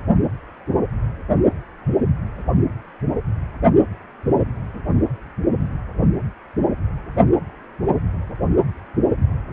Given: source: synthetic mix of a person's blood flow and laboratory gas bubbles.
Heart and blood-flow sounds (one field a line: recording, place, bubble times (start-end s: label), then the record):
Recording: Doppler ultrasound of blood flow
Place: precordium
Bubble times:
no bubbles
From the record:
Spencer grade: 0 (complete lack of bubble signals)